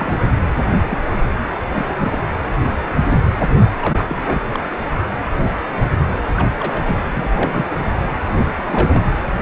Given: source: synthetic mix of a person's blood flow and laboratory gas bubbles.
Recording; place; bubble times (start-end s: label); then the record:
Doppler ultrasound of blood flow; precordium
0.00-0.33 s: bubbles
0.91-0.98 s: bubbles
1.73-2.12 s: bubbles
3.81-4.23 s: bubbles
4.26-4.41 s: bubbles
4.53-4.60 s: bubbles
6.37-6.47 s: bubbles
6.60-6.98 s: bubbles
7.12-7.78 s: bubbles
8.27-8.35 s: bubbles
8.67-9.02 s: bubbles
From the record:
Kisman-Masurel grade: 232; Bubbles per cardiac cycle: several, 3 to 8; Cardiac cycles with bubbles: 50 to 99%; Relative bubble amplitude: moderate (0.250 to 0.450); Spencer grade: 3 (all of the cardiac periods contain showers or single bubble signals, but not dominating or overriding the cardiac motion signals); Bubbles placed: anywhere in the cardiac cycle